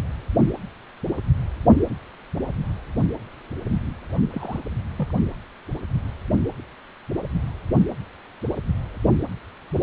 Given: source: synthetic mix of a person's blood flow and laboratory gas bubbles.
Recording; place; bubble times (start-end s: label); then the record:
Doppler ultrasound of blood flow; precordium
4.31-4.60 s: bubbles
4.98-5.12 s: bubbles
From the record:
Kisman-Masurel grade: 121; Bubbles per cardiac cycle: 1 to 2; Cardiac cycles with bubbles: 10 to 50%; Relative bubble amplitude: barely perceptible (0.100 to 0.250); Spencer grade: 2 (many but less than half of the cardiac periods contain bubble signals, singularly or in groups); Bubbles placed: only in the low amplitude regions of the cardiac cycle